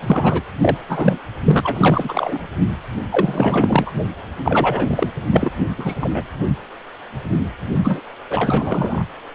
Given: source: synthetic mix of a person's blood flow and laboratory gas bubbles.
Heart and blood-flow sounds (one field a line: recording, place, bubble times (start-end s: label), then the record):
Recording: Doppler ultrasound of blood flow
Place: precordium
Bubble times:
0.02-0.42 s: bubbles
0.63-0.77 s: bubbles
0.89-1.19 s: bubbles
1.44-2.46 s: bubbles
3.11-3.91 s: bubbles
4.44-5.10 s: bubbles
5.26-5.52 s: bubbles
5.78-5.96 s: bubbles
6.00-6.25 s: bubbles
7.83-8.01 s: bubbles
8.29-9.02 s: bubbles
From the record:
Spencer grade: 3 (all of the cardiac periods contain showers or single bubble signals, but not dominating or overriding the cardiac motion signals)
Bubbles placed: anywhere in the cardiac cycle